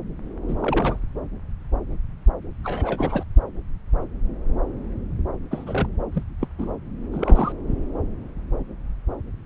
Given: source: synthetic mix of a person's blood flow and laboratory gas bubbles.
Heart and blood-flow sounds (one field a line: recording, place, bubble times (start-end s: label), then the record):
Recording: Doppler ultrasound of blood flow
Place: subclavian vein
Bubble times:
0.48-0.54 s: bubbles
0.59-0.98 s: bubbles
2.64-3.24 s: bubbles
5.51-5.88 s: bubbles
6.13-6.23 s: bubbles
6.41-6.48 s: bubbles
6.58-6.71 s: bubbles
7.12-7.53 s: bubbles
7.67-7.85 s: bubbles
From the record:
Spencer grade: 2 (many but less than half of the cardiac periods contain bubble signals, singularly or in groups)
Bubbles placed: anywhere in the cardiac cycle